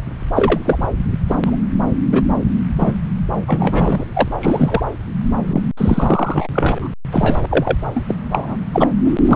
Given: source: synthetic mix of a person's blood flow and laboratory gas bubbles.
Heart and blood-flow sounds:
Doppler ultrasound of blood flow; subclavian vein
0.35-0.88 s: bubbles
1.27-1.35 s: bubbles
1.44-1.56 s: bubbles
2.12-2.22 s: bubbles
2.78-2.92 s: bubbles
3.47-4.04 s: bubbles
4.15-4.29 s: bubbles
4.40-4.82 s: bubbles
5.48-5.63 s: bubbles
5.77-6.47 s: bubbles
6.53-6.94 s: bubbles
7.12-7.41 s: bubbles
7.50-7.76 s: bubbles
7.95-8.02 s: bubbles
8.07-8.14 s: bubbles
8.30-8.56 s: bubbles
8.73-8.88 s: bubbles
9.04-9.36 s: bubbles
From the record:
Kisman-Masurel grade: 243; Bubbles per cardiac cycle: several, 3 to 8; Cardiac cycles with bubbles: 100%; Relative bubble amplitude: loud (0.450 to 0.775); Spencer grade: 3 (all of the cardiac periods contain showers or single bubble signals, but not dominating or overriding the cardiac motion signals); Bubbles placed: anywhere in the cardiac cycle

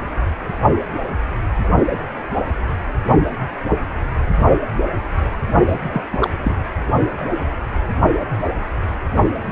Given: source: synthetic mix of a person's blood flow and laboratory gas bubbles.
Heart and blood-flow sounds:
Doppler ultrasound of blood flow; precordium
5.68-5.75 s: bubbles
5.91-6.03 s: bubbles
6.12-6.18 s: bubbles
6.20-6.30 s: bubbles
6.43-6.55 s: bubbles
From the record:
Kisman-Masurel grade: 212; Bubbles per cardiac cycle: several, 3 to 8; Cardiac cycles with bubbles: 1 to 10%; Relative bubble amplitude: moderate (0.250 to 0.450); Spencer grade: 1 (occasional bubble signal discernible with the cardiac motion signal, with majority of cardiac periods free of bubbles); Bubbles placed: only in the low amplitude regions of the cardiac cycle

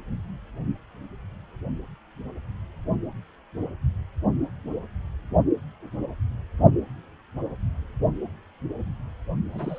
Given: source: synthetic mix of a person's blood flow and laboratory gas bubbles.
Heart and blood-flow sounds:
Doppler ultrasound of blood flow; precordium
9.52-9.79 s: bubbles
From the record:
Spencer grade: 1 (occasional bubble signal discernible with the cardiac motion signal, with majority of cardiac periods free of bubbles); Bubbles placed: only in the low amplitude regions of the cardiac cycle

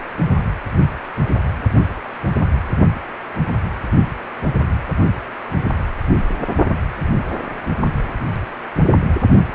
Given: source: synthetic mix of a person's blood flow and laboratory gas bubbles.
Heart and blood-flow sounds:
Doppler ultrasound of blood flow; precordium
0.00-0.02 s: bubbles
From the record:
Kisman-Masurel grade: 211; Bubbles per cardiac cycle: several, 3 to 8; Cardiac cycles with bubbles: 1 to 10%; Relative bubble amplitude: barely perceptible (0.100 to 0.250); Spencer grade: 1 (occasional bubble signal discernible with the cardiac motion signal, with majority of cardiac periods free of bubbles); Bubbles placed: only in the low amplitude regions of the cardiac cycle

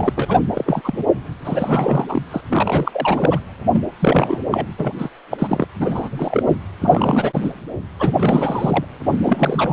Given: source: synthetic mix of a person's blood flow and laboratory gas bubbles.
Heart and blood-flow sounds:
Doppler ultrasound of blood flow; precordium
0.00-0.12 s: bubbles
0.15-0.25 s: bubbles
0.28-0.40 s: bubbles
0.54-0.81 s: bubbles
0.84-1.03 s: bubbles
1.44-2.28 s: bubbles
2.31-2.41 s: bubbles
2.49-3.39 s: bubbles
3.73-3.83 s: bubbles
3.99-4.38 s: bubbles
4.51-4.66 s: bubbles
4.77-4.92 s: bubbles
4.98-5.10 s: bubbles
5.31-5.67 s: bubbles
5.80-6.43 s: bubbles
6.50-6.56 s: bubbles
6.81-7.50 s: bubbles
8.00-8.12 s: bubbles
8.19-8.85 s: bubbles
9.12-9.17 s: bubbles
9.24-9.73 s: bubbles
From the record:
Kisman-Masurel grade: 342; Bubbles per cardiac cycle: rolling drumbeat, 9 or more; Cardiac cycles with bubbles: 100%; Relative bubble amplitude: moderate (0.250 to 0.450); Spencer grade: 3 (all of the cardiac periods contain showers or single bubble signals, but not dominating or overriding the cardiac motion signals); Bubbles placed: anywhere in the cardiac cycle

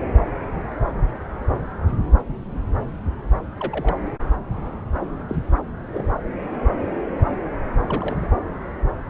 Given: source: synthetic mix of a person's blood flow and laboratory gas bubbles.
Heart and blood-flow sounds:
Doppler ultrasound of blood flow; subclavian vein
2.28-2.33 s: bubbles
3.59-3.96 s: bubbles
5.29-5.36 s: bubbles
5.91-6.09 s: bubbles
7.78-8.28 s: bubbles
From the record:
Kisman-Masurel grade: 121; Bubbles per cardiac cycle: 1 to 2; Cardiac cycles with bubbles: 10 to 50%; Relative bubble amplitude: barely perceptible (0.100 to 0.250); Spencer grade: 2 (many but less than half of the cardiac periods contain bubble signals, singularly or in groups); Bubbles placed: anywhere in the cardiac cycle

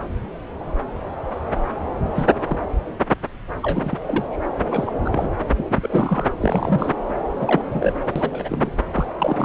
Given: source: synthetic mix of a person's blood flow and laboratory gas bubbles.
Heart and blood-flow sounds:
Doppler ultrasound of blood flow; subclavian vein
2.15-2.26 s: bubbles
2.47-2.58 s: bubbles
3.62-3.98 s: bubbles
4.03-4.42 s: bubbles
4.69-4.94 s: bubbles
5.04-5.30 s: bubbles
5.58-5.63 s: bubbles
5.70-5.75 s: bubbles
5.82-6.25 s: bubbles
6.40-6.92 s: bubbles
7.39-7.61 s: bubbles
7.71-7.93 s: bubbles
8.16-8.72 s: bubbles
8.93-9.06 s: bubbles
9.18-9.45 s: bubbles
From the record:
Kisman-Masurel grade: 232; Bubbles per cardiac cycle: several, 3 to 8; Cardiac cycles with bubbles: 50 to 99%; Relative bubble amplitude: moderate (0.250 to 0.450); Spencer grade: 3 (all of the cardiac periods contain showers or single bubble signals, but not dominating or overriding the cardiac motion signals); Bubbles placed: anywhere in the cardiac cycle

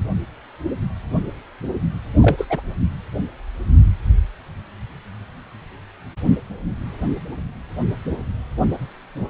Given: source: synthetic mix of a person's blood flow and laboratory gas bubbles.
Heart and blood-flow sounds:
Doppler ultrasound of blood flow; precordium
2.21-2.47 s: bubbles
2.50-2.61 s: bubbles
From the record:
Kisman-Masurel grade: 212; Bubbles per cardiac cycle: several, 3 to 8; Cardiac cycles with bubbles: 1 to 10%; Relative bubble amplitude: moderate (0.250 to 0.450); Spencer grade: 1 (occasional bubble signal discernible with the cardiac motion signal, with majority of cardiac periods free of bubbles); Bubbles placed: anywhere in the cardiac cycle

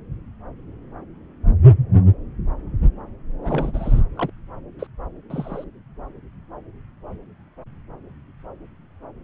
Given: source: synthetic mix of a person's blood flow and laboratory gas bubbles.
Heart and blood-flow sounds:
Doppler ultrasound of blood flow; subclavian vein
3.43-4.01 s: bubbles
4.15-4.29 s: bubbles
4.79-4.87 s: bubbles
5.30-5.64 s: bubbles
From the record:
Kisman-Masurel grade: 221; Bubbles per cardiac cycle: several, 3 to 8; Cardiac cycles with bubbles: 10 to 50%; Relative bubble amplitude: barely perceptible (0.100 to 0.250); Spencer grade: 2 (many but less than half of the cardiac periods contain bubble signals, singularly or in groups); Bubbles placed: anywhere in the cardiac cycle

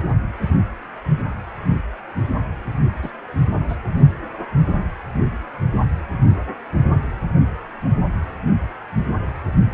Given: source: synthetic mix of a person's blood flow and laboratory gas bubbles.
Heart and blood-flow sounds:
Doppler ultrasound of blood flow; precordium
3.02-3.11 s: bubbles
3.68-3.76 s: bubbles
From the record:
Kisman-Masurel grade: 121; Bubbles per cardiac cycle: 1 to 2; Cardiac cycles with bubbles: 10 to 50%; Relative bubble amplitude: barely perceptible (0.100 to 0.250); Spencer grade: 2 (many but less than half of the cardiac periods contain bubble signals, singularly or in groups); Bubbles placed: only in the low amplitude regions of the cardiac cycle

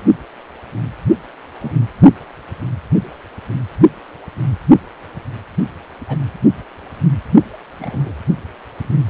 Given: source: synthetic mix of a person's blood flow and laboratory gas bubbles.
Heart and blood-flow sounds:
Doppler ultrasound of blood flow; precordium
0.00-0.04 s: bubbles
1.59-1.72 s: bubbles
6.08-6.17 s: bubbles
7.79-8.12 s: bubbles
From the record:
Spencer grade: 2 (many but less than half of the cardiac periods contain bubble signals, singularly or in groups); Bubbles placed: only in the low amplitude regions of the cardiac cycle

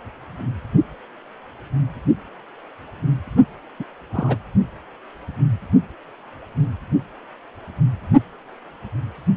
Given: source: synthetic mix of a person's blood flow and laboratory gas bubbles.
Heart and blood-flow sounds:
Doppler ultrasound of blood flow; precordium
3.79-3.84 s: bubbles
4.13-4.37 s: bubbles
From the record:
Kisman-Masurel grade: 212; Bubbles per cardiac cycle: several, 3 to 8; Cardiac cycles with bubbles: 1 to 10%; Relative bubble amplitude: moderate (0.250 to 0.450); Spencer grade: 1 (occasional bubble signal discernible with the cardiac motion signal, with majority of cardiac periods free of bubbles); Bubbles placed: only in the low amplitude regions of the cardiac cycle

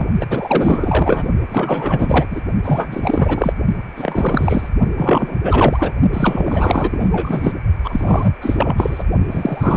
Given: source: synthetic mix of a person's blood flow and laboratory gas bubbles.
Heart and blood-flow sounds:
Doppler ultrasound of blood flow; precordium
0.00-0.06 s: bubbles
0.20-0.26 s: bubbles
0.30-1.27 s: bubbles
1.49-2.26 s: bubbles
2.31-2.41 s: bubbles
2.64-3.53 s: bubbles
3.96-4.69 s: bubbles
4.96-5.38 s: bubbles
5.43-5.93 s: bubbles
6.13-7.09 s: bubbles
7.11-7.53 s: bubbles
7.83-8.34 s: bubbles
8.41-9.04 s: bubbles
9.31-9.77 s: bubbles
From the record:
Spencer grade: 4 (maximum detectable bubble signal sounding continuously throughout systole and diastole of every cardiac period, and overriding the amplitude of the normal cardiac signals); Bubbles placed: only in the low amplitude regions of the cardiac cycle

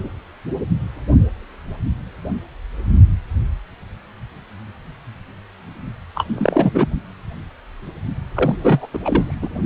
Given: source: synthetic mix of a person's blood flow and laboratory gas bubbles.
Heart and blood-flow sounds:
Doppler ultrasound of blood flow; precordium
6.15-6.25 s: bubbles
6.28-6.88 s: bubbles
8.34-8.87 s: bubbles
8.93-8.99 s: bubbles
9.04-9.34 s: bubbles
9.41-9.49 s: bubbles
From the record:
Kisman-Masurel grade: 223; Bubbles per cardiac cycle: several, 3 to 8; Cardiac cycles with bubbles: 10 to 50%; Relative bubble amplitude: loud (0.450 to 0.775); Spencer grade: 2 (many but less than half of the cardiac periods contain bubble signals, singularly or in groups); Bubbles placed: only in the low amplitude regions of the cardiac cycle

